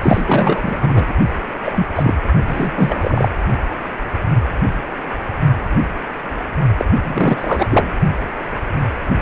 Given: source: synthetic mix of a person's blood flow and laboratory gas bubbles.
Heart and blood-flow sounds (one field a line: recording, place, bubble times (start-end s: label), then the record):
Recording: Doppler ultrasound of blood flow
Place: precordium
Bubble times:
0.02-1.14 s: bubbles
1.65-1.87 s: bubbles
1.95-2.17 s: bubbles
2.47-2.72 s: bubbles
2.75-3.31 s: bubbles
6.77-6.85 s: bubbles
7.03-7.93 s: bubbles
From the record:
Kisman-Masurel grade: 233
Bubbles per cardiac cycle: several, 3 to 8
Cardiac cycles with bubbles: 50 to 99%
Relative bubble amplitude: loud (0.450 to 0.775)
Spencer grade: 3 (all of the cardiac periods contain showers or single bubble signals, but not dominating or overriding the cardiac motion signals)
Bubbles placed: only in the low amplitude regions of the cardiac cycle